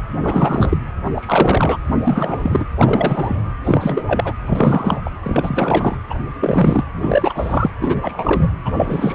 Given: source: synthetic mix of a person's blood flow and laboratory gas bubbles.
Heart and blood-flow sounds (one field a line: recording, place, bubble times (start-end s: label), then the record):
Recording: Doppler ultrasound of blood flow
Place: precordium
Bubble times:
0.13-0.78 s: bubbles
1.05-1.10 s: bubbles
1.15-1.77 s: bubbles
1.86-1.95 s: bubbles
2.03-2.66 s: bubbles
2.77-3.43 s: bubbles
3.64-4.33 s: bubbles
4.47-5.02 s: bubbles
5.05-5.10 s: bubbles
5.23-5.99 s: bubbles
6.10-6.20 s: bubbles
6.40-6.83 s: bubbles
6.96-7.71 s: bubbles
7.81-8.49 s: bubbles
8.65-8.72 s: bubbles
8.77-9.15 s: bubbles
From the record:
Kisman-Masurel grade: 343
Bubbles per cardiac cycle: rolling drumbeat, 9 or more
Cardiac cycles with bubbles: 100%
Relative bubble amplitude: loud (0.450 to 0.775)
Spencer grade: 3 (all of the cardiac periods contain showers or single bubble signals, but not dominating or overriding the cardiac motion signals)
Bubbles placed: anywhere in the cardiac cycle